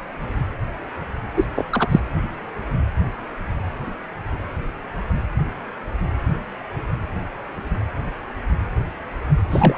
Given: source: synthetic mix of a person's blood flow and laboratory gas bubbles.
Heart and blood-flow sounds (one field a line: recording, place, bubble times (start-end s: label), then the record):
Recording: Doppler ultrasound of blood flow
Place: precordium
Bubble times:
1.36-1.47 s: bubbles
1.54-1.66 s: bubbles
1.70-2.01 s: bubbles
9.50-9.78 s: bubbles
From the record:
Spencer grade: 2 (many but less than half of the cardiac periods contain bubble signals, singularly or in groups)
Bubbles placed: anywhere in the cardiac cycle